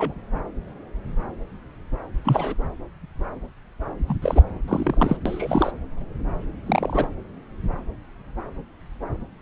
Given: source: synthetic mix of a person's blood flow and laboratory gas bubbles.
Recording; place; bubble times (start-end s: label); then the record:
Doppler ultrasound of blood flow; subclavian vein
0.00-0.14 s: bubbles
2.24-2.54 s: bubbles
4.07-4.17 s: bubbles
4.22-4.42 s: bubbles
4.67-5.17 s: bubbles
5.25-5.72 s: bubbles
6.66-7.08 s: bubbles
From the record:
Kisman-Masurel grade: 222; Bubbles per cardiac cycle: several, 3 to 8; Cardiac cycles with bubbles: 10 to 50%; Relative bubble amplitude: moderate (0.250 to 0.450); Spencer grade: 2 (many but less than half of the cardiac periods contain bubble signals, singularly or in groups); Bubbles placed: anywhere in the cardiac cycle